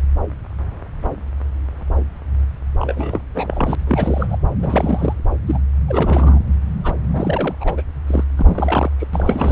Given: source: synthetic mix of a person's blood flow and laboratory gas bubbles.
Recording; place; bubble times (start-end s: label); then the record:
Doppler ultrasound of blood flow; subclavian vein
2.79-3.21 s: bubbles
3.34-3.75 s: bubbles
3.87-4.38 s: bubbles
4.59-5.14 s: bubbles
5.46-5.58 s: bubbles
5.88-6.39 s: bubbles
6.83-6.93 s: bubbles
7.13-7.55 s: bubbles
7.60-7.83 s: bubbles
8.07-8.24 s: bubbles
8.37-8.92 s: bubbles
8.99-9.07 s: bubbles
9.13-9.52 s: bubbles
From the record:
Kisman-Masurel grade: 332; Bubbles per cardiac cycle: rolling drumbeat, 9 or more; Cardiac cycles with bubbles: 50 to 99%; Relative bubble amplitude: moderate (0.250 to 0.450); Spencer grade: 3 (all of the cardiac periods contain showers or single bubble signals, but not dominating or overriding the cardiac motion signals); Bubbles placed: anywhere in the cardiac cycle